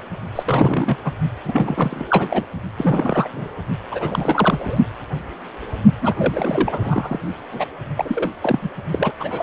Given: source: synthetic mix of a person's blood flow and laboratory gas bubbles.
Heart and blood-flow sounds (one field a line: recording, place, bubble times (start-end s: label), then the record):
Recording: Doppler ultrasound of blood flow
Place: precordium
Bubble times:
0.35-0.96 s: bubbles
1.04-1.12 s: bubbles
1.44-2.05 s: bubbles
2.08-2.45 s: bubbles
2.77-3.28 s: bubbles
3.33-3.48 s: bubbles
3.91-4.79 s: bubbles
6.01-6.15 s: bubbles
6.19-7.19 s: bubbles
7.51-7.65 s: bubbles
7.97-8.29 s: bubbles
8.41-8.59 s: bubbles
8.62-8.70 s: bubbles
8.92-9.12 s: bubbles
9.20-9.43 s: bubbles
From the record:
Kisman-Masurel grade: 332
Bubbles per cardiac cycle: rolling drumbeat, 9 or more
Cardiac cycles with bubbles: 50 to 99%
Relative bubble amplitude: moderate (0.250 to 0.450)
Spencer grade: 3 (all of the cardiac periods contain showers or single bubble signals, but not dominating or overriding the cardiac motion signals)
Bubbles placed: only in the low amplitude regions of the cardiac cycle